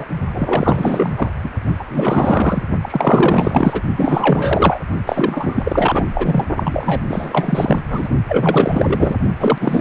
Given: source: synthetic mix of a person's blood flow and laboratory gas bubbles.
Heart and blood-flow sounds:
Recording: Doppler ultrasound of blood flow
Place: precordium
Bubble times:
0.00-0.05 s: bubbles
0.33-1.31 s: bubbles
1.44-1.50 s: bubbles
1.68-1.74 s: bubbles
1.79-1.85 s: bubbles
1.89-2.64 s: bubbles
2.81-3.81 s: bubbles
3.96-4.79 s: bubbles
5.06-6.06 s: bubbles
6.14-6.45 s: bubbles
6.56-7.03 s: bubbles
7.09-7.80 s: bubbles
7.89-8.09 s: bubbles
8.29-9.15 s: bubbles
9.39-9.58 s: bubbles
9.61-9.81 s: bubbles
From the record:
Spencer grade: 4 (maximum detectable bubble signal sounding continuously throughout systole and diastole of every cardiac period, and overriding the amplitude of the normal cardiac signals)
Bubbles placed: only in the low amplitude regions of the cardiac cycle

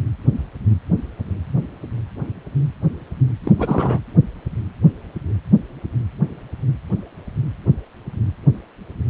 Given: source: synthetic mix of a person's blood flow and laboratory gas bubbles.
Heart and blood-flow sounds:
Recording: Doppler ultrasound of blood flow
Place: precordium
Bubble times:
3.44-3.52 s: bubbles
3.56-3.99 s: bubbles
From the record:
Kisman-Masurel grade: 212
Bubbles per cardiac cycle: several, 3 to 8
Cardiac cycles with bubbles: 1 to 10%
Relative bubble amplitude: moderate (0.250 to 0.450)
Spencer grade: 1 (occasional bubble signal discernible with the cardiac motion signal, with majority of cardiac periods free of bubbles)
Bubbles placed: anywhere in the cardiac cycle

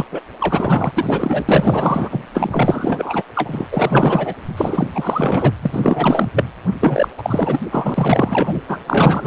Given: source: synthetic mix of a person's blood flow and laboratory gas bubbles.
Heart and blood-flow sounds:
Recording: Doppler ultrasound of blood flow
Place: precordium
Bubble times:
0.00-0.05 s: bubbles
0.11-0.20 s: bubbles
0.40-0.92 s: bubbles
0.95-1.46 s: bubbles
1.49-2.26 s: bubbles
2.34-3.23 s: bubbles
3.35-3.69 s: bubbles
3.71-4.34 s: bubbles
4.57-4.90 s: bubbles
4.95-5.51 s: bubbles
5.62-6.28 s: bubbles
6.36-6.45 s: bubbles
6.80-7.08 s: bubbles
7.17-7.60 s: bubbles
7.71-8.62 s: bubbles
8.68-8.79 s: bubbles
8.87-9.27 s: bubbles
From the record:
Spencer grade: 4 (maximum detectable bubble signal sounding continuously throughout systole and diastole of every cardiac period, and overriding the amplitude of the normal cardiac signals)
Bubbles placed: anywhere in the cardiac cycle

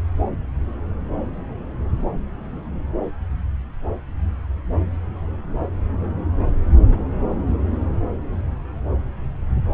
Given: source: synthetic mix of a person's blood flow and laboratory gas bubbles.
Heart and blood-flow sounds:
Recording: Doppler ultrasound of blood flow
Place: subclavian vein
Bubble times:
6.88-7.02 s: bubbles
From the record:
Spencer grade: 1 (occasional bubble signal discernible with the cardiac motion signal, with majority of cardiac periods free of bubbles)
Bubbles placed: anywhere in the cardiac cycle

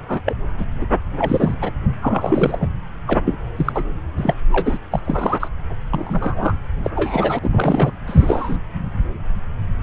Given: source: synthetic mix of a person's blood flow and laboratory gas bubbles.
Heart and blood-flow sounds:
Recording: Doppler ultrasound of blood flow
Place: subclavian vein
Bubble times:
0.08-0.21 s: bubbles
0.26-0.35 s: bubbles
0.49-0.53 s: bubbles
0.57-0.65 s: bubbles
0.81-0.86 s: bubbles
1.19-1.54 s: bubbles
1.61-1.71 s: bubbles
2.01-2.69 s: bubbles
3.07-3.19 s: bubbles
3.25-3.38 s: bubbles
3.56-3.83 s: bubbles
4.17-4.34 s: bubbles
4.50-4.79 s: bubbles
4.91-5.01 s: bubbles
5.04-5.48 s: bubbles
5.91-6.53 s: bubbles
6.83-6.90 s: bubbles
6.96-7.39 s: bubbles
7.42-7.96 s: bubbles
8.07-8.57 s: bubbles
From the record:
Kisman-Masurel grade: 332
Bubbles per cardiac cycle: rolling drumbeat, 9 or more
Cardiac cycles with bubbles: 50 to 99%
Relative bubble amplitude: moderate (0.250 to 0.450)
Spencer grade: 3 (all of the cardiac periods contain showers or single bubble signals, but not dominating or overriding the cardiac motion signals)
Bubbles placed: anywhere in the cardiac cycle

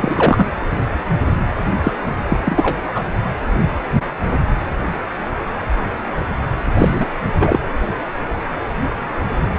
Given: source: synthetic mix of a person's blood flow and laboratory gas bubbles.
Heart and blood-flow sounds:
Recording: Doppler ultrasound of blood flow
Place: precordium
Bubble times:
0.00-0.45 s: bubbles
1.83-1.92 s: bubbles
2.29-2.37 s: bubbles
2.45-2.81 s: bubbles
2.95-3.04 s: bubbles
6.78-7.06 s: bubbles
7.39-7.59 s: bubbles
From the record:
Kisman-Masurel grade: 223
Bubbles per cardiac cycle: several, 3 to 8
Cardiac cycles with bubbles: 10 to 50%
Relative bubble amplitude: loud (0.450 to 0.775)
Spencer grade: 2 (many but less than half of the cardiac periods contain bubble signals, singularly or in groups)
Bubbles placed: anywhere in the cardiac cycle

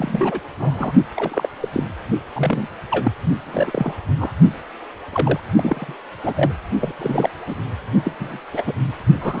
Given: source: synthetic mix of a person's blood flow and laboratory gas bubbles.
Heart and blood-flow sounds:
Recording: Doppler ultrasound of blood flow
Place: precordium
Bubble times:
0.00-0.40 s: bubbles
0.59-0.93 s: bubbles
1.16-1.49 s: bubbles
1.61-1.69 s: bubbles
1.73-1.83 s: bubbles
2.35-2.67 s: bubbles
2.90-3.12 s: bubbles
3.46-3.94 s: bubbles
4.17-4.33 s: bubbles
5.12-5.40 s: bubbles
5.56-5.96 s: bubbles
6.23-6.52 s: bubbles
6.80-6.92 s: bubbles
6.98-7.29 s: bubbles
7.46-7.56 s: bubbles
8.04-8.15 s: bubbles
8.19-8.39 s: bubbles
8.53-8.73 s: bubbles
9.20-9.40 s: bubbles
From the record:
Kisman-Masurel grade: 242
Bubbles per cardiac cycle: several, 3 to 8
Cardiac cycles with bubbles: 100%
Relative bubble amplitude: moderate (0.250 to 0.450)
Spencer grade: 3 (all of the cardiac periods contain showers or single bubble signals, but not dominating or overriding the cardiac motion signals)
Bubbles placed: only in the low amplitude regions of the cardiac cycle

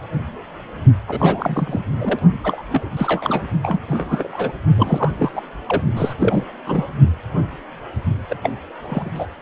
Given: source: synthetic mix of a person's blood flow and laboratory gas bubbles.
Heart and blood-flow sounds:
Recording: Doppler ultrasound of blood flow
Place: precordium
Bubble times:
1.07-1.82 s: bubbles
1.98-2.19 s: bubbles
2.44-2.62 s: bubbles
2.69-2.90 s: bubbles
2.96-3.44 s: bubbles
3.62-3.79 s: bubbles
3.88-4.28 s: bubbles
4.33-4.53 s: bubbles
4.75-5.42 s: bubbles
5.66-5.82 s: bubbles
5.96-6.14 s: bubbles
6.19-6.44 s: bubbles
6.65-6.87 s: bubbles
8.29-8.37 s: bubbles
8.43-8.53 s: bubbles
8.85-9.27 s: bubbles
From the record:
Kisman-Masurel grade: 332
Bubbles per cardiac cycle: rolling drumbeat, 9 or more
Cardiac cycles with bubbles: 50 to 99%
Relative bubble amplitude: moderate (0.250 to 0.450)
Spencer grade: 3 (all of the cardiac periods contain showers or single bubble signals, but not dominating or overriding the cardiac motion signals)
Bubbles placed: only in the low amplitude regions of the cardiac cycle

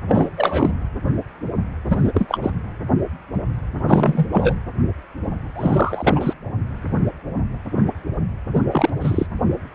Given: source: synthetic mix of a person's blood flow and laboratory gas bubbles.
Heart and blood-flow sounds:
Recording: Doppler ultrasound of blood flow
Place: precordium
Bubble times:
0.08-0.29 s: bubbles
0.37-0.70 s: bubbles
1.85-2.11 s: bubbles
2.14-2.40 s: bubbles
2.42-2.50 s: bubbles
3.87-4.26 s: bubbles
4.32-4.54 s: bubbles
5.56-6.33 s: bubbles
8.52-8.62 s: bubbles
8.71-8.89 s: bubbles
9.00-9.26 s: bubbles
From the record:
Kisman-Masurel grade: 223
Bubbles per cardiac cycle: several, 3 to 8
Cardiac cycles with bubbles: 10 to 50%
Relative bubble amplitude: loud (0.450 to 0.775)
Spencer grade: 2 (many but less than half of the cardiac periods contain bubble signals, singularly or in groups)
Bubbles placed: anywhere in the cardiac cycle

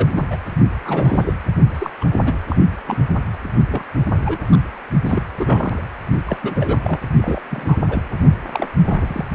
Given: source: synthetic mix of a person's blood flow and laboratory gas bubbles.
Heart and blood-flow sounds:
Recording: Doppler ultrasound of blood flow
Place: precordium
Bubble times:
0.00-0.26 s: bubbles
0.30-0.36 s: bubbles
0.85-1.33 s: bubbles
1.74-1.90 s: bubbles
2.00-2.04 s: bubbles
2.24-2.38 s: bubbles
2.48-2.56 s: bubbles
2.86-3.02 s: bubbles
3.68-3.82 s: bubbles
4.25-4.38 s: bubbles
4.51-4.57 s: bubbles
5.04-5.23 s: bubbles
5.39-5.84 s: bubbles
6.26-6.38 s: bubbles
6.42-6.79 s: bubbles
6.84-6.99 s: bubbles
7.21-7.40 s: bubbles
7.50-7.77 s: bubbles
7.88-8.03 s: bubbles
8.52-8.66 s: bubbles
8.79-9.26 s: bubbles
From the record:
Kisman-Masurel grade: 242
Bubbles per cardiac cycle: several, 3 to 8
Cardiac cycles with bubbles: 100%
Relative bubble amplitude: moderate (0.250 to 0.450)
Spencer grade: 3 (all of the cardiac periods contain showers or single bubble signals, but not dominating or overriding the cardiac motion signals)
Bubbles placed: only in the low amplitude regions of the cardiac cycle

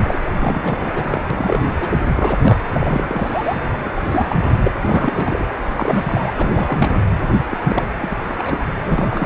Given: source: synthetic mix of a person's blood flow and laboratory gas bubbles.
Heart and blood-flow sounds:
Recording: Doppler ultrasound of blood flow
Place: precordium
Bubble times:
0.07-0.21 s: bubbles
0.29-1.22 s: bubbles
1.30-1.74 s: bubbles
1.80-1.99 s: bubbles
2.14-2.37 s: bubbles
2.41-2.60 s: bubbles
2.73-3.56 s: bubbles
3.84-3.92 s: bubbles
3.95-4.71 s: bubbles
4.85-5.50 s: bubbles
5.74-6.34 s: bubbles
6.38-7.04 s: bubbles
7.50-7.58 s: bubbles
7.63-7.86 s: bubbles
8.00-8.34 s: bubbles
8.38-8.64 s: bubbles
8.83-9.26 s: bubbles
From the record:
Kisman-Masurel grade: 342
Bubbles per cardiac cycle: rolling drumbeat, 9 or more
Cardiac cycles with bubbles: 100%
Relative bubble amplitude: moderate (0.250 to 0.450)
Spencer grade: 3 (all of the cardiac periods contain showers or single bubble signals, but not dominating or overriding the cardiac motion signals)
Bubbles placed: anywhere in the cardiac cycle

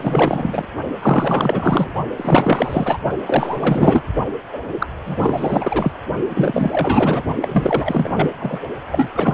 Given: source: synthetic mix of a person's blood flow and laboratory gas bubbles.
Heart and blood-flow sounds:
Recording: Doppler ultrasound of blood flow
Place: precordium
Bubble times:
0.00-0.65 s: bubbles
1.02-1.92 s: bubbles
2.17-2.98 s: bubbles
3.26-4.04 s: bubbles
4.52-4.59 s: bubbles
4.71-4.86 s: bubbles
5.05-5.98 s: bubbles
6.29-7.22 s: bubbles
7.35-7.48 s: bubbles
7.51-8.29 s: bubbles
8.40-8.60 s: bubbles
8.91-9.10 s: bubbles
9.13-9.34 s: bubbles
From the record:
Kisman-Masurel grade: 444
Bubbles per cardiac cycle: continuous sound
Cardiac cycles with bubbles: 100%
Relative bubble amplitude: maximal (0.775 to 0.999)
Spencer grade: 4 (maximum detectable bubble signal sounding continuously throughout systole and diastole of every cardiac period, and overriding the amplitude of the normal cardiac signals)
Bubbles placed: only in the low amplitude regions of the cardiac cycle

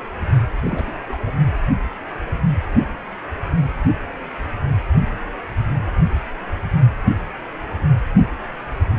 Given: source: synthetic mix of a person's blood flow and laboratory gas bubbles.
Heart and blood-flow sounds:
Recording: Doppler ultrasound of blood flow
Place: precordium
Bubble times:
0.64-0.84 s: bubbles
0.86-0.97 s: bubbles
1.07-1.31 s: bubbles
From the record:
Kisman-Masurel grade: 211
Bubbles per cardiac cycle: several, 3 to 8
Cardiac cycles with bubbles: 1 to 10%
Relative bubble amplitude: barely perceptible (0.100 to 0.250)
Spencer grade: 1 (occasional bubble signal discernible with the cardiac motion signal, with majority of cardiac periods free of bubbles)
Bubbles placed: only in the low amplitude regions of the cardiac cycle

